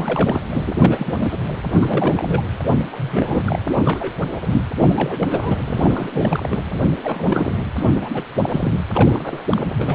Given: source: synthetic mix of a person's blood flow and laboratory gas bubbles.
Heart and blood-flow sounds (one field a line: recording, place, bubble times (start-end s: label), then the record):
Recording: Doppler ultrasound of blood flow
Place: precordium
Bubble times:
0.00-0.40 s: bubbles
0.50-0.64 s: bubbles
0.67-1.38 s: bubbles
1.81-2.42 s: bubbles
2.64-2.71 s: bubbles
2.92-3.62 s: bubbles
3.68-4.18 s: bubbles
4.41-4.62 s: bubbles
4.89-5.28 s: bubbles
5.30-5.61 s: bubbles
5.65-6.48 s: bubbles
6.50-6.62 s: bubbles
6.65-6.90 s: bubbles
7.04-7.55 s: bubbles
7.77-8.22 s: bubbles
8.42-8.72 s: bubbles
8.89-9.44 s: bubbles
9.50-9.71 s: bubbles
9.78-9.95 s: bubbles
From the record:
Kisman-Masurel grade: 342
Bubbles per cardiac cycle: rolling drumbeat, 9 or more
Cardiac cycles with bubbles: 100%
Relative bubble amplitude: moderate (0.250 to 0.450)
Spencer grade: 3 (all of the cardiac periods contain showers or single bubble signals, but not dominating or overriding the cardiac motion signals)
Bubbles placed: anywhere in the cardiac cycle